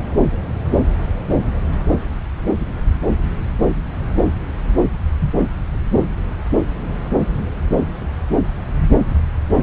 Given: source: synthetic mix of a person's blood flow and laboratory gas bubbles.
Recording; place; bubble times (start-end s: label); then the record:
Doppler ultrasound of blood flow; subclavian vein
no bubbles
From the record:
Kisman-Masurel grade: 000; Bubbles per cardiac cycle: 0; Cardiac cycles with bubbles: 0%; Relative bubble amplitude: no bubbles discernible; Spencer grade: 0 (complete lack of bubble signals)